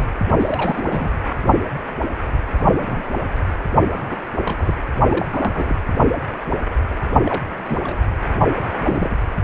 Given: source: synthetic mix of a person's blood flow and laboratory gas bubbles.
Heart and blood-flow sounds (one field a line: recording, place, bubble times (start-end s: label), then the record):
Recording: Doppler ultrasound of blood flow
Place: precordium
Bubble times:
0.00-0.02 s: bubbles
0.39-1.28 s: bubbles
2.57-3.03 s: bubbles
3.91-4.18 s: bubbles
4.42-4.73 s: bubbles
5.09-5.25 s: bubbles
5.30-5.75 s: bubbles
7.12-7.17 s: bubbles
7.25-7.46 s: bubbles
7.65-8.00 s: bubbles
8.81-9.15 s: bubbles
From the record:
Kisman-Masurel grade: 232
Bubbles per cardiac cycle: several, 3 to 8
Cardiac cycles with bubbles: 50 to 99%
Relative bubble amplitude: moderate (0.250 to 0.450)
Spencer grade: 3 (all of the cardiac periods contain showers or single bubble signals, but not dominating or overriding the cardiac motion signals)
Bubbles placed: anywhere in the cardiac cycle